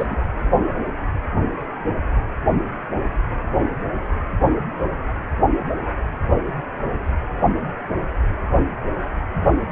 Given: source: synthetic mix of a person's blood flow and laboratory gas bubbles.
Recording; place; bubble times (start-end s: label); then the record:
Doppler ultrasound of blood flow; precordium
0.00-0.21 s: bubbles
From the record:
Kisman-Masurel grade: 211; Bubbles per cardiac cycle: several, 3 to 8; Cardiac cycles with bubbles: 1 to 10%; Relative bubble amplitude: barely perceptible (0.100 to 0.250); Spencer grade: 1 (occasional bubble signal discernible with the cardiac motion signal, with majority of cardiac periods free of bubbles); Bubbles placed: anywhere in the cardiac cycle